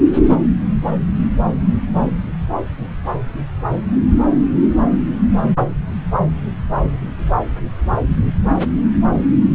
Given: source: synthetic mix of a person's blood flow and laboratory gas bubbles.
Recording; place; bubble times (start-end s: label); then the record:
Doppler ultrasound of blood flow; subclavian vein
no bubbles
From the record:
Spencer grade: 0 (complete lack of bubble signals)